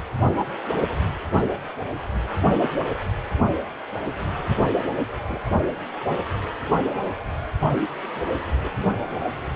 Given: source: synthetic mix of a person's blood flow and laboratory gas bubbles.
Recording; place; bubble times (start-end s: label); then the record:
Doppler ultrasound of blood flow; precordium
0.34-0.44 s: bubbles
2.94-2.98 s: bubbles
5.25-5.42 s: bubbles
8.15-8.42 s: bubbles
8.61-8.71 s: bubbles
From the record:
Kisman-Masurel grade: 121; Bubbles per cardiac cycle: 1 to 2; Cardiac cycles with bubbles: 10 to 50%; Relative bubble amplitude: barely perceptible (0.100 to 0.250); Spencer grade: 2 (many but less than half of the cardiac periods contain bubble signals, singularly or in groups); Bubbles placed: only in the low amplitude regions of the cardiac cycle